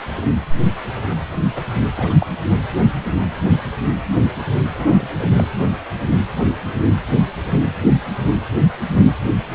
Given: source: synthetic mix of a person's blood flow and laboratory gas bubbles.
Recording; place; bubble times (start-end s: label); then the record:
Doppler ultrasound of blood flow; precordium
1.09-1.17 s: bubbles
1.31-1.36 s: bubbles
1.55-1.63 s: bubbles
1.96-2.15 s: bubbles
2.19-2.27 s: bubbles
4.74-5.32 s: bubbles
5.35-5.48 s: bubbles
From the record:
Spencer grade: 2 (many but less than half of the cardiac periods contain bubble signals, singularly or in groups); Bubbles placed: anywhere in the cardiac cycle